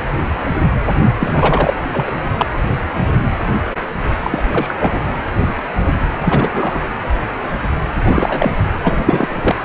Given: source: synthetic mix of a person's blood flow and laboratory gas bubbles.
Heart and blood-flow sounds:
Doppler ultrasound of blood flow; precordium
1.20-1.74 s: bubbles
1.92-2.12 s: bubbles
2.38-2.46 s: bubbles
4.21-4.75 s: bubbles
4.79-5.02 s: bubbles
6.22-6.85 s: bubbles
8.06-8.52 s: bubbles
8.84-9.56 s: bubbles
From the record:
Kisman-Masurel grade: 333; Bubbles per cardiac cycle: rolling drumbeat, 9 or more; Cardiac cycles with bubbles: 50 to 99%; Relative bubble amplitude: loud (0.450 to 0.775); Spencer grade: 3 (all of the cardiac periods contain showers or single bubble signals, but not dominating or overriding the cardiac motion signals); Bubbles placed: anywhere in the cardiac cycle

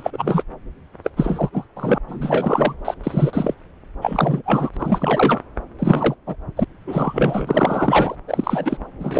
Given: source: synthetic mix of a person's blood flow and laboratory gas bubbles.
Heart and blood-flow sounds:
Doppler ultrasound of blood flow; subclavian vein
0.00-0.43 s: bubbles
1.04-1.10 s: bubbles
1.17-1.50 s: bubbles
1.53-1.65 s: bubbles
1.76-1.98 s: bubbles
2.08-2.76 s: bubbles
2.85-2.94 s: bubbles
3.03-3.54 s: bubbles
4.01-4.70 s: bubbles
4.73-5.41 s: bubbles
5.79-6.15 s: bubbles
6.26-6.36 s: bubbles
6.57-6.65 s: bubbles
6.87-8.15 s: bubbles
8.28-8.77 s: bubbles
8.99-9.20 s: bubbles
From the record:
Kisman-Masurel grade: 343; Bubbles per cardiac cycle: rolling drumbeat, 9 or more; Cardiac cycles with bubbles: 100%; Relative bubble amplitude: loud (0.450 to 0.775); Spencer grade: 3 (all of the cardiac periods contain showers or single bubble signals, but not dominating or overriding the cardiac motion signals); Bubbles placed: anywhere in the cardiac cycle

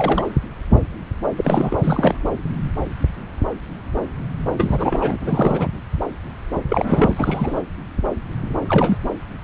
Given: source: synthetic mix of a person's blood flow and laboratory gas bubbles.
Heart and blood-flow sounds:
Doppler ultrasound of blood flow; subclavian vein
0.00-0.24 s: bubbles
1.36-1.77 s: bubbles
1.83-2.19 s: bubbles
4.57-5.18 s: bubbles
5.21-5.67 s: bubbles
6.69-7.61 s: bubbles
8.68-8.97 s: bubbles
From the record:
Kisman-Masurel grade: 332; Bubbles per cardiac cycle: rolling drumbeat, 9 or more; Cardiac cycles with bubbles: 50 to 99%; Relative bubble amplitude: moderate (0.250 to 0.450); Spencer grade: 3 (all of the cardiac periods contain showers or single bubble signals, but not dominating or overriding the cardiac motion signals); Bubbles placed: anywhere in the cardiac cycle

